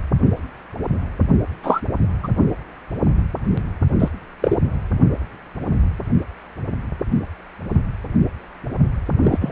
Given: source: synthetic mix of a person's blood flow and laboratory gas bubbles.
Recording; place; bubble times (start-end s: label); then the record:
Doppler ultrasound of blood flow; precordium
1.63-1.81 s: bubbles
2.23-2.29 s: bubbles
3.99-4.09 s: bubbles
4.42-4.56 s: bubbles
9.23-9.52 s: bubbles
From the record:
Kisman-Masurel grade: 123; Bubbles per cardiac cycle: 1 to 2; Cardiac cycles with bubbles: 10 to 50%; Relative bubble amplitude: loud (0.450 to 0.775); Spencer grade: 2 (many but less than half of the cardiac periods contain bubble signals, singularly or in groups); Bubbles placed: only in the low amplitude regions of the cardiac cycle